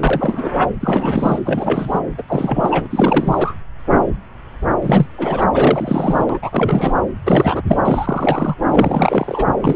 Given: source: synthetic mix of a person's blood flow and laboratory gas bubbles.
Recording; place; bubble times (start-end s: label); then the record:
Doppler ultrasound of blood flow; subclavian vein
0.00-0.51 s: bubbles
0.80-1.39 s: bubbles
1.45-2.00 s: bubbles
2.17-2.22 s: bubbles
2.27-2.88 s: bubbles
2.90-3.53 s: bubbles
4.82-5.07 s: bubbles
5.18-5.45 s: bubbles
5.53-6.25 s: bubbles
6.29-6.40 s: bubbles
6.42-6.94 s: bubbles
7.25-7.62 s: bubbles
7.67-7.77 s: bubbles
7.85-8.54 s: bubbles
8.68-9.43 s: bubbles
9.62-9.76 s: bubbles
From the record:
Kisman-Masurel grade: 333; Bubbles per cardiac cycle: rolling drumbeat, 9 or more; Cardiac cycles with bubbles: 50 to 99%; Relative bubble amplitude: loud (0.450 to 0.775); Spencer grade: 3 (all of the cardiac periods contain showers or single bubble signals, but not dominating or overriding the cardiac motion signals); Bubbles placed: anywhere in the cardiac cycle